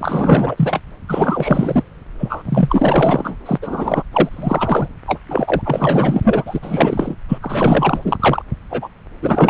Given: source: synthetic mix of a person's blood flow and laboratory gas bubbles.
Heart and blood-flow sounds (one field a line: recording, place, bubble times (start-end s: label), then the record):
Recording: Doppler ultrasound of blood flow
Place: subclavian vein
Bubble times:
0.00-0.81 s: bubbles
1.08-1.83 s: bubbles
2.19-3.37 s: bubbles
3.46-3.58 s: bubbles
3.62-4.03 s: bubbles
4.12-4.88 s: bubbles
5.07-5.20 s: bubbles
5.28-5.62 s: bubbles
5.64-6.59 s: bubbles
6.62-7.16 s: bubbles
7.28-7.38 s: bubbles
7.41-8.17 s: bubbles
8.19-8.42 s: bubbles
8.70-8.88 s: bubbles
9.22-9.49 s: bubbles
From the record:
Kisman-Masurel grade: 444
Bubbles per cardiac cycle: continuous sound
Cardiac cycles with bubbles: 100%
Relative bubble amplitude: maximal (0.775 to 0.999)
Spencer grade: 4 (maximum detectable bubble signal sounding continuously throughout systole and diastole of every cardiac period, and overriding the amplitude of the normal cardiac signals)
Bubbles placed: anywhere in the cardiac cycle